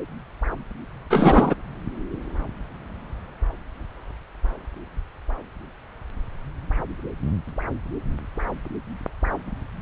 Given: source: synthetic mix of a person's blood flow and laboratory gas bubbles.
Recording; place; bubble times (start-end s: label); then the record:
Doppler ultrasound of blood flow; subclavian vein
1.10-1.54 s: bubbles
From the record:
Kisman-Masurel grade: 223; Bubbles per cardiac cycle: several, 3 to 8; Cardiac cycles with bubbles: 10 to 50%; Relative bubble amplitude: loud (0.450 to 0.775); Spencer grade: 2 (many but less than half of the cardiac periods contain bubble signals, singularly or in groups); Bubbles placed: anywhere in the cardiac cycle